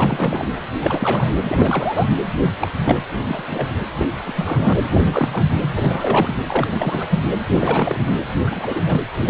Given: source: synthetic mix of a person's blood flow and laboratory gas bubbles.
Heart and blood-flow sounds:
Doppler ultrasound of blood flow; precordium
0.00-0.47 s: bubbles
0.81-1.32 s: bubbles
1.46-2.11 s: bubbles
2.61-2.72 s: bubbles
2.84-3.01 s: bubbles
3.23-3.68 s: bubbles
3.80-3.85 s: bubbles
3.98-4.08 s: bubbles
4.25-4.73 s: bubbles
4.85-5.43 s: bubbles
5.62-6.33 s: bubbles
6.46-7.19 s: bubbles
7.52-7.98 s: bubbles
8.46-8.81 s: bubbles
8.86-9.04 s: bubbles
9.23-9.30 s: bubbles
From the record:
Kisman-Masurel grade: 342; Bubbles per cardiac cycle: rolling drumbeat, 9 or more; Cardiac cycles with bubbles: 100%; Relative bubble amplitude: moderate (0.250 to 0.450); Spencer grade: 3 (all of the cardiac periods contain showers or single bubble signals, but not dominating or overriding the cardiac motion signals); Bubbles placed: anywhere in the cardiac cycle

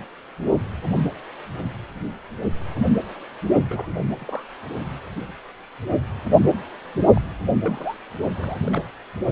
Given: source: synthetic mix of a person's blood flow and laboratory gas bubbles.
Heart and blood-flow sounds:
Doppler ultrasound of blood flow; precordium
3.69-3.89 s: bubbles
4.17-4.45 s: bubbles
7.13-7.21 s: bubbles
7.62-7.97 s: bubbles
8.35-8.60 s: bubbles
8.67-8.81 s: bubbles
9.29-9.32 s: bubbles
From the record:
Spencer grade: 2 (many but less than half of the cardiac periods contain bubble signals, singularly or in groups); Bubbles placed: only in the low amplitude regions of the cardiac cycle

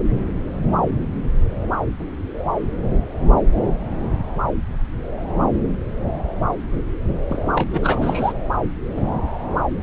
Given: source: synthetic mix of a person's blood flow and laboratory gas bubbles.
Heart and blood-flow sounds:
Doppler ultrasound of blood flow; subclavian vein
7.29-8.33 s: bubbles
From the record:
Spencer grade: 1 (occasional bubble signal discernible with the cardiac motion signal, with majority of cardiac periods free of bubbles); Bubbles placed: anywhere in the cardiac cycle

